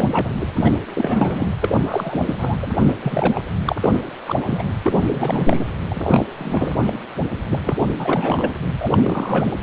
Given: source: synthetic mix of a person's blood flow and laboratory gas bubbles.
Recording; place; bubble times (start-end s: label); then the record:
Doppler ultrasound of blood flow; precordium
0.00-0.29 s: bubbles
0.40-0.46 s: bubbles
0.55-0.71 s: bubbles
0.94-1.50 s: bubbles
1.61-2.34 s: bubbles
2.38-2.57 s: bubbles
2.62-2.72 s: bubbles
2.75-2.98 s: bubbles
3.02-3.42 s: bubbles
3.65-3.75 s: bubbles
3.81-4.09 s: bubbles
4.26-4.63 s: bubbles
4.82-5.65 s: bubbles
5.89-6.76 s: bubbles
6.87-6.99 s: bubbles
7.49-7.59 s: bubbles
7.64-7.78 s: bubbles
7.99-8.54 s: bubbles
8.80-9.60 s: bubbles
From the record:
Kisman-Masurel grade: 343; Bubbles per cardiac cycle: rolling drumbeat, 9 or more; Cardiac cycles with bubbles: 100%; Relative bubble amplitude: loud (0.450 to 0.775); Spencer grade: 3 (all of the cardiac periods contain showers or single bubble signals, but not dominating or overriding the cardiac motion signals); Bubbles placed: anywhere in the cardiac cycle